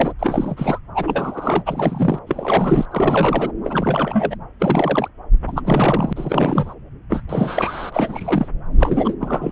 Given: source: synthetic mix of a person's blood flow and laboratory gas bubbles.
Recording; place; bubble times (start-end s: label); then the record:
Doppler ultrasound of blood flow; subclavian vein
0.00-0.13 s: bubbles
0.19-0.79 s: bubbles
0.95-1.62 s: bubbles
1.66-2.19 s: bubbles
2.27-2.85 s: bubbles
2.91-3.52 s: bubbles
3.64-4.36 s: bubbles
4.59-5.08 s: bubbles
5.47-5.62 s: bubbles
5.65-6.13 s: bubbles
6.16-6.73 s: bubbles
7.10-7.21 s: bubbles
7.29-8.48 s: bubbles
8.78-9.14 s: bubbles
9.20-9.51 s: bubbles
From the record:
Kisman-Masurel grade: 342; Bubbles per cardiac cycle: rolling drumbeat, 9 or more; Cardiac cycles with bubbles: 100%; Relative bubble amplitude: moderate (0.250 to 0.450); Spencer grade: 3 (all of the cardiac periods contain showers or single bubble signals, but not dominating or overriding the cardiac motion signals); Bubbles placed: anywhere in the cardiac cycle